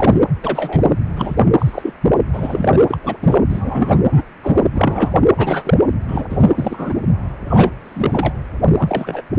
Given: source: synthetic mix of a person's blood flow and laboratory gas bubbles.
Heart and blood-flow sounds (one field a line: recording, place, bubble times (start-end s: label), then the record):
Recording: Doppler ultrasound of blood flow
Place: precordium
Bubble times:
0.00-0.17 s: bubbles
0.43-0.91 s: bubbles
1.15-1.45 s: bubbles
1.58-1.93 s: bubbles
2.33-2.79 s: bubbles
2.88-2.98 s: bubbles
3.04-3.17 s: bubbles
3.22-3.38 s: bubbles
3.49-4.05 s: bubbles
4.12-4.22 s: bubbles
4.42-4.63 s: bubbles
4.75-5.20 s: bubbles
5.37-5.77 s: bubbles
6.08-6.24 s: bubbles
6.29-6.51 s: bubbles
6.54-7.00 s: bubbles
7.47-7.71 s: bubbles
7.85-8.33 s: bubbles
8.77-9.21 s: bubbles
9.37-9.39 s: bubbles
From the record:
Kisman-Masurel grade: 243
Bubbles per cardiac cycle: several, 3 to 8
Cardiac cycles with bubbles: 100%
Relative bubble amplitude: loud (0.450 to 0.775)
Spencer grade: 3 (all of the cardiac periods contain showers or single bubble signals, but not dominating or overriding the cardiac motion signals)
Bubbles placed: anywhere in the cardiac cycle